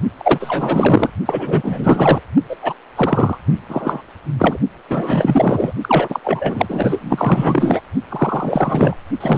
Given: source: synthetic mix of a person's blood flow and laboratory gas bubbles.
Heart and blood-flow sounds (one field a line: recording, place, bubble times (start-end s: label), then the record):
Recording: Doppler ultrasound of blood flow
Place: precordium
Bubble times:
0.18-1.10 s: bubbles
1.26-2.20 s: bubbles
2.49-2.56 s: bubbles
2.62-2.73 s: bubbles
2.96-3.38 s: bubbles
3.69-4.01 s: bubbles
4.38-4.58 s: bubbles
4.88-5.73 s: bubbles
5.81-6.20 s: bubbles
6.24-6.66 s: bubbles
6.69-7.81 s: bubbles
8.10-8.97 s: bubbles
9.20-9.38 s: bubbles
From the record:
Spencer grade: 4 (maximum detectable bubble signal sounding continuously throughout systole and diastole of every cardiac period, and overriding the amplitude of the normal cardiac signals)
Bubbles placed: only in the low amplitude regions of the cardiac cycle